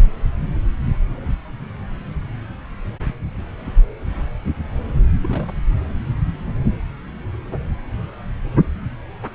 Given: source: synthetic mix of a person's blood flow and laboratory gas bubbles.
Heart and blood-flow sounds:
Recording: Doppler ultrasound of blood flow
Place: subclavian vein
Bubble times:
5.23-5.58 s: bubbles
From the record:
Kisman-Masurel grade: 121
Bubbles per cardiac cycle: 1 to 2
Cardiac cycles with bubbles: 10 to 50%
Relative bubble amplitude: barely perceptible (0.100 to 0.250)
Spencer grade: 2 (many but less than half of the cardiac periods contain bubble signals, singularly or in groups)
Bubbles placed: anywhere in the cardiac cycle

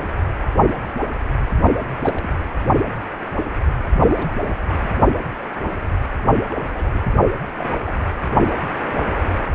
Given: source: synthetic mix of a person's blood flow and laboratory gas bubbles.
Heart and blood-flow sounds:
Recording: Doppler ultrasound of blood flow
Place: precordium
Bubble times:
2.01-2.37 s: bubbles
3.95-4.33 s: bubbles
4.42-4.49 s: bubbles
4.69-4.91 s: bubbles
6.51-6.55 s: bubbles
6.74-6.91 s: bubbles
6.94-7.00 s: bubbles
7.58-7.71 s: bubbles
7.86-8.10 s: bubbles
From the record:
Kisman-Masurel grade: 221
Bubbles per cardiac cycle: several, 3 to 8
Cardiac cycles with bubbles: 10 to 50%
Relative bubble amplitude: barely perceptible (0.100 to 0.250)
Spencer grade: 2 (many but less than half of the cardiac periods contain bubble signals, singularly or in groups)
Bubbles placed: only in the low amplitude regions of the cardiac cycle

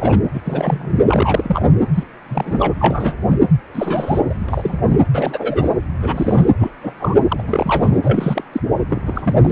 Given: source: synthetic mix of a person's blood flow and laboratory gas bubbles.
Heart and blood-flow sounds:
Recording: Doppler ultrasound of blood flow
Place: precordium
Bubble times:
0.01-0.18 s: bubbles
0.34-0.41 s: bubbles
0.44-0.94 s: bubbles
1.08-1.66 s: bubbles
1.94-2.03 s: bubbles
2.28-2.73 s: bubbles
2.79-3.14 s: bubbles
3.27-3.38 s: bubbles
3.73-4.20 s: bubbles
4.29-4.35 s: bubbles
4.48-4.82 s: bubbles
4.87-4.98 s: bubbles
5.13-5.69 s: bubbles
6.00-6.49 s: bubbles
6.58-6.71 s: bubbles
6.82-6.94 s: bubbles
7.00-7.16 s: bubbles
7.28-7.43 s: bubbles
7.48-8.44 s: bubbles
8.52-8.60 s: bubbles
8.89-9.01 s: bubbles
9.05-9.52 s: bubbles
From the record:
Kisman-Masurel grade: 242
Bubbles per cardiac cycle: several, 3 to 8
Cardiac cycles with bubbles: 100%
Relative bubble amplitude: moderate (0.250 to 0.450)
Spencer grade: 3 (all of the cardiac periods contain showers or single bubble signals, but not dominating or overriding the cardiac motion signals)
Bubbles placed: anywhere in the cardiac cycle

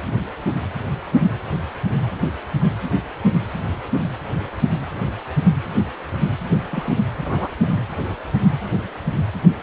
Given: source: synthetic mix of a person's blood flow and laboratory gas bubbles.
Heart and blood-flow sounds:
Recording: Doppler ultrasound of blood flow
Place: precordium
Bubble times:
6.71-6.98 s: bubbles
7.25-7.48 s: bubbles
7.69-7.83 s: bubbles
From the record:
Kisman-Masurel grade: 122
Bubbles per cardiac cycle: 1 to 2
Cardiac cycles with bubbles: 10 to 50%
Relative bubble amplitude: moderate (0.250 to 0.450)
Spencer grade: 2 (many but less than half of the cardiac periods contain bubble signals, singularly or in groups)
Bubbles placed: anywhere in the cardiac cycle

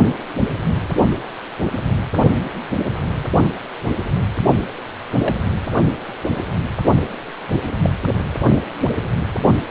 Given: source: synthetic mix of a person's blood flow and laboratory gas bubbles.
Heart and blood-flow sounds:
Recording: Doppler ultrasound of blood flow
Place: precordium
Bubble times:
5.21-5.37 s: bubbles
7.82-7.90 s: bubbles
From the record:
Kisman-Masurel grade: 122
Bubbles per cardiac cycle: 1 to 2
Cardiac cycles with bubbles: 10 to 50%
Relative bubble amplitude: moderate (0.250 to 0.450)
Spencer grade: 2 (many but less than half of the cardiac periods contain bubble signals, singularly or in groups)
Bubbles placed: only in the low amplitude regions of the cardiac cycle

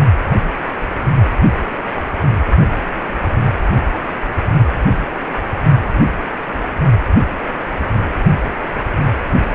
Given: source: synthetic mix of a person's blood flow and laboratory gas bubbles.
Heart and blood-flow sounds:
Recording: Doppler ultrasound of blood flow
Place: precordium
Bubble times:
no bubbles
From the record:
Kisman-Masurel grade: 000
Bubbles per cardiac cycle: 0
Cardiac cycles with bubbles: 0%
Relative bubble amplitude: no bubbles discernible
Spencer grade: 0 (complete lack of bubble signals)

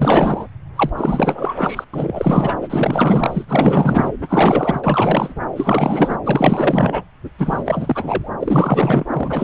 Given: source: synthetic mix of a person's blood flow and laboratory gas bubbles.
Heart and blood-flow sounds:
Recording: Doppler ultrasound of blood flow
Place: subclavian vein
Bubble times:
0.00-0.48 s: bubbles
0.75-0.90 s: bubbles
0.96-1.54 s: bubbles
1.57-1.84 s: bubbles
1.93-2.54 s: bubbles
2.61-3.45 s: bubbles
3.48-4.12 s: bubbles
4.21-4.81 s: bubbles
4.83-5.42 s: bubbles
5.55-6.17 s: bubbles
6.24-7.04 s: bubbles
7.38-8.30 s: bubbles
8.39-9.04 s: bubbles
9.08-9.44 s: bubbles
From the record:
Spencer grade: 4 (maximum detectable bubble signal sounding continuously throughout systole and diastole of every cardiac period, and overriding the amplitude of the normal cardiac signals)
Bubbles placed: anywhere in the cardiac cycle

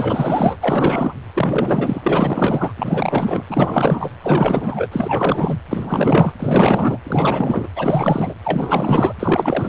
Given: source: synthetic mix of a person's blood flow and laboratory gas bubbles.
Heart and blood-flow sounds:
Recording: Doppler ultrasound of blood flow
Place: precordium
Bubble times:
0.00-0.56 s: bubbles
0.61-1.13 s: bubbles
1.35-2.72 s: bubbles
2.77-3.44 s: bubbles
3.49-4.10 s: bubbles
4.22-4.87 s: bubbles
4.92-5.60 s: bubbles
5.69-6.32 s: bubbles
6.39-6.98 s: bubbles
7.04-7.67 s: bubbles
7.75-8.34 s: bubbles
8.44-9.15 s: bubbles
9.19-9.68 s: bubbles
From the record:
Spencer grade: 4 (maximum detectable bubble signal sounding continuously throughout systole and diastole of every cardiac period, and overriding the amplitude of the normal cardiac signals)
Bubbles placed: anywhere in the cardiac cycle

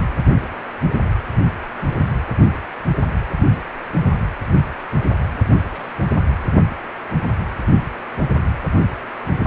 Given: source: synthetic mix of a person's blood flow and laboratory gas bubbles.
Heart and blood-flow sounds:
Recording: Doppler ultrasound of blood flow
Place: precordium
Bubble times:
5.32-5.37 s: bubbles
5.72-5.88 s: bubbles
From the record:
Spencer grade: 1 (occasional bubble signal discernible with the cardiac motion signal, with majority of cardiac periods free of bubbles)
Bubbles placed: anywhere in the cardiac cycle

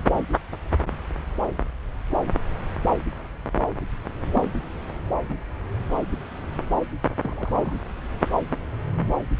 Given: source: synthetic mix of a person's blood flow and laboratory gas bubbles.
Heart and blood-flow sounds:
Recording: Doppler ultrasound of blood flow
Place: subclavian vein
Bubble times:
4.35-4.43 s: bubbles
5.29-5.37 s: bubbles
7.22-7.73 s: bubbles
From the record:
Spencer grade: 2 (many but less than half of the cardiac periods contain bubble signals, singularly or in groups)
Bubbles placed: anywhere in the cardiac cycle

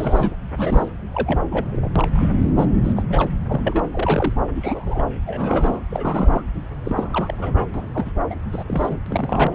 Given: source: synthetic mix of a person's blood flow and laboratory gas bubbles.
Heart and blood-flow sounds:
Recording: Doppler ultrasound of blood flow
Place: subclavian vein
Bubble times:
0.00-0.36 s: bubbles
0.57-0.89 s: bubbles
1.14-1.40 s: bubbles
1.48-1.91 s: bubbles
1.95-2.29 s: bubbles
2.58-2.65 s: bubbles
2.83-2.94 s: bubbles
2.96-3.03 s: bubbles
3.09-3.27 s: bubbles
3.45-3.83 s: bubbles
3.93-4.33 s: bubbles
4.54-5.02 s: bubbles
5.26-5.81 s: bubbles
5.90-6.42 s: bubbles
6.84-7.35 s: bubbles
7.38-7.69 s: bubbles
7.74-7.87 s: bubbles
7.94-8.11 s: bubbles
8.30-8.34 s: bubbles
8.51-8.63 s: bubbles
8.67-8.99 s: bubbles
9.06-9.55 s: bubbles
From the record:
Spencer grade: 3 (all of the cardiac periods contain showers or single bubble signals, but not dominating or overriding the cardiac motion signals)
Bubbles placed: anywhere in the cardiac cycle

